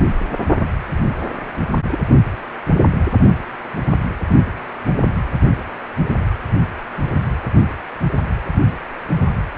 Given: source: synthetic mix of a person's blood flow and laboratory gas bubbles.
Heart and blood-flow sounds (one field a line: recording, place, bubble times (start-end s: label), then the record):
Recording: Doppler ultrasound of blood flow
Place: precordium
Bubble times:
1.91-1.99 s: bubbles
From the record:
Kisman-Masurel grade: 112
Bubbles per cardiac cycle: 1 to 2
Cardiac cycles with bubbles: 1 to 10%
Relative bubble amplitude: moderate (0.250 to 0.450)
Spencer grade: 1 (occasional bubble signal discernible with the cardiac motion signal, with majority of cardiac periods free of bubbles)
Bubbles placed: anywhere in the cardiac cycle